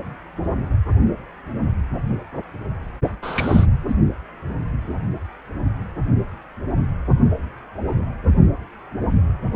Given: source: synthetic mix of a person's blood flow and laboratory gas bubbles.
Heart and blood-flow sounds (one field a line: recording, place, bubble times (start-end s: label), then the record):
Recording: Doppler ultrasound of blood flow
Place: precordium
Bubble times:
3.22-3.66 s: bubbles
3.88-3.95 s: bubbles
From the record:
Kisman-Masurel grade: 112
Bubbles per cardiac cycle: 1 to 2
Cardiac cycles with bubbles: 1 to 10%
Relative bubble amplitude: moderate (0.250 to 0.450)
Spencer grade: 1 (occasional bubble signal discernible with the cardiac motion signal, with majority of cardiac periods free of bubbles)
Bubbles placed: anywhere in the cardiac cycle